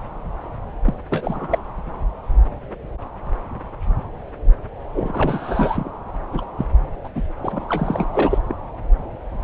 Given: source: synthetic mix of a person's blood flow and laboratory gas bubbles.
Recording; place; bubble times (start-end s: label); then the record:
Doppler ultrasound of blood flow; subclavian vein
0.85-0.95 s: bubbles
1.10-1.62 s: bubbles
4.94-5.90 s: bubbles
6.33-6.46 s: bubbles
6.57-6.66 s: bubbles
7.04-7.09 s: bubbles
7.15-7.21 s: bubbles
7.42-7.65 s: bubbles
7.69-8.38 s: bubbles
8.48-8.54 s: bubbles
From the record:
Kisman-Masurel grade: 332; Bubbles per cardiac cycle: rolling drumbeat, 9 or more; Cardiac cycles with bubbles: 50 to 99%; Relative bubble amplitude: moderate (0.250 to 0.450); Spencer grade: 3 (all of the cardiac periods contain showers or single bubble signals, but not dominating or overriding the cardiac motion signals); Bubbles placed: anywhere in the cardiac cycle